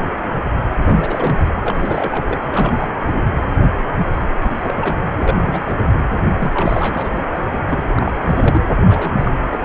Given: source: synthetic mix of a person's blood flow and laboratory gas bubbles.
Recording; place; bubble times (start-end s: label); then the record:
Doppler ultrasound of blood flow; precordium
0.69-0.74 s: bubbles
0.87-1.52 s: bubbles
1.66-2.41 s: bubbles
2.51-2.88 s: bubbles
3.04-3.23 s: bubbles
4.42-4.51 s: bubbles
4.57-4.96 s: bubbles
5.16-5.75 s: bubbles
5.93-6.04 s: bubbles
6.39-7.20 s: bubbles
7.34-7.41 s: bubbles
7.67-7.83 s: bubbles
7.86-8.62 s: bubbles
8.89-9.14 s: bubbles
9.17-9.38 s: bubbles
9.49-9.60 s: bubbles
9.62-9.65 s: bubbles
From the record:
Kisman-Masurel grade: 332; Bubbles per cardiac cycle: rolling drumbeat, 9 or more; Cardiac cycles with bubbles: 50 to 99%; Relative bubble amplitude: moderate (0.250 to 0.450); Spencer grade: 3 (all of the cardiac periods contain showers or single bubble signals, but not dominating or overriding the cardiac motion signals); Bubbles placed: anywhere in the cardiac cycle